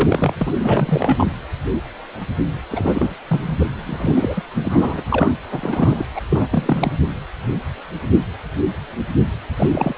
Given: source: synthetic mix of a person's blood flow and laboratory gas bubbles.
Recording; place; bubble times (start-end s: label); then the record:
Doppler ultrasound of blood flow; precordium
0.00-0.34 s: bubbles
0.40-0.53 s: bubbles
0.59-1.26 s: bubbles
2.70-3.15 s: bubbles
3.27-3.67 s: bubbles
3.85-4.42 s: bubbles
4.55-5.04 s: bubbles
5.12-5.38 s: bubbles
5.50-6.07 s: bubbles
6.15-6.21 s: bubbles
6.30-6.46 s: bubbles
6.51-6.96 s: bubbles
9.56-9.70 s: bubbles
9.72-9.94 s: bubbles
From the record:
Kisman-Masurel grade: 333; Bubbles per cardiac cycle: rolling drumbeat, 9 or more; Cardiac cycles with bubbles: 50 to 99%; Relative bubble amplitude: loud (0.450 to 0.775); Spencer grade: 3 (all of the cardiac periods contain showers or single bubble signals, but not dominating or overriding the cardiac motion signals); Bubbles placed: anywhere in the cardiac cycle